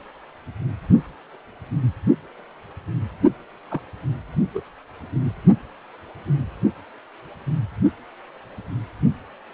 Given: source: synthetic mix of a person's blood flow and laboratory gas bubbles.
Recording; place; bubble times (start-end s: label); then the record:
Doppler ultrasound of blood flow; precordium
3.71-3.80 s: bubbles
4.54-4.61 s: bubbles
From the record:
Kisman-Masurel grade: 111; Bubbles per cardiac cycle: 1 to 2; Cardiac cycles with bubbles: 1 to 10%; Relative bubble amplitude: barely perceptible (0.100 to 0.250); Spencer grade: 1 (occasional bubble signal discernible with the cardiac motion signal, with majority of cardiac periods free of bubbles); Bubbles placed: only in the low amplitude regions of the cardiac cycle